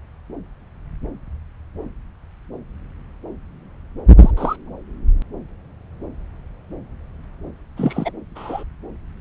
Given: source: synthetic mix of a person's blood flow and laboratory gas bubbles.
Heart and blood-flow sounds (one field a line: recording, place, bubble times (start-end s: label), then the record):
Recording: Doppler ultrasound of blood flow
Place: subclavian vein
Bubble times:
4.17-4.31 s: bubbles
4.36-4.56 s: bubbles
7.76-8.12 s: bubbles
8.35-8.63 s: bubbles
From the record:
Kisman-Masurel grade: 122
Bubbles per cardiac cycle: 1 to 2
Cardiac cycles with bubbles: 10 to 50%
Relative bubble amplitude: moderate (0.250 to 0.450)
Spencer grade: 2 (many but less than half of the cardiac periods contain bubble signals, singularly or in groups)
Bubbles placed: anywhere in the cardiac cycle